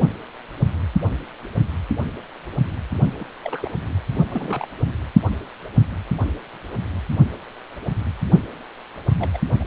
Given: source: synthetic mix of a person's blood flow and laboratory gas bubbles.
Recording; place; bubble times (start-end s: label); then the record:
Doppler ultrasound of blood flow; precordium
3.19-3.24 s: bubbles
3.44-3.69 s: bubbles
4.30-4.67 s: bubbles
9.09-9.30 s: bubbles
9.33-9.38 s: bubbles
9.60-9.64 s: bubbles
From the record:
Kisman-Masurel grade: 221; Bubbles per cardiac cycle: several, 3 to 8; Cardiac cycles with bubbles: 10 to 50%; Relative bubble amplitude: barely perceptible (0.100 to 0.250); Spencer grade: 2 (many but less than half of the cardiac periods contain bubble signals, singularly or in groups); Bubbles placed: only in the low amplitude regions of the cardiac cycle